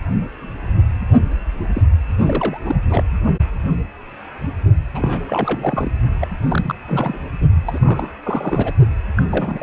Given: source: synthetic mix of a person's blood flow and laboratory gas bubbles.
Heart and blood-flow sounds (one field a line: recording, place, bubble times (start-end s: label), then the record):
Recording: Doppler ultrasound of blood flow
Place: precordium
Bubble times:
1.74-1.82 s: bubbles
2.19-2.60 s: bubbles
2.66-2.76 s: bubbles
2.89-3.04 s: bubbles
4.95-5.18 s: bubbles
5.26-5.91 s: bubbles
6.21-6.27 s: bubbles
6.47-6.75 s: bubbles
6.87-7.18 s: bubbles
7.67-8.18 s: bubbles
8.23-8.72 s: bubbles
9.16-9.22 s: bubbles
9.29-9.62 s: bubbles
From the record:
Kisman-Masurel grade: 332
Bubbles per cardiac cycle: rolling drumbeat, 9 or more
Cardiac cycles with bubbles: 50 to 99%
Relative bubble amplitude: moderate (0.250 to 0.450)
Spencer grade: 3 (all of the cardiac periods contain showers or single bubble signals, but not dominating or overriding the cardiac motion signals)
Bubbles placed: only in the low amplitude regions of the cardiac cycle